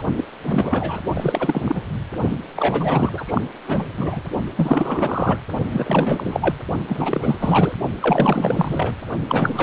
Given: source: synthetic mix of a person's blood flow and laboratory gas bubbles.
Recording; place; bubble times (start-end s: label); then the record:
Doppler ultrasound of blood flow; precordium
0.00-0.03 s: bubbles
0.15-0.24 s: bubbles
0.46-0.99 s: bubbles
1.07-1.82 s: bubbles
2.29-2.37 s: bubbles
2.56-3.42 s: bubbles
3.67-3.85 s: bubbles
3.97-4.21 s: bubbles
4.57-5.38 s: bubbles
5.71-6.55 s: bubbles
6.87-7.36 s: bubbles
7.39-7.72 s: bubbles
8.01-8.95 s: bubbles
9.28-9.63 s: bubbles
From the record:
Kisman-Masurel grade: 444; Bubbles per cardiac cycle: continuous sound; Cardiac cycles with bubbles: 100%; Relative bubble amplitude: maximal (0.775 to 0.999); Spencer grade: 4 (maximum detectable bubble signal sounding continuously throughout systole and diastole of every cardiac period, and overriding the amplitude of the normal cardiac signals); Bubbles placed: only in the low amplitude regions of the cardiac cycle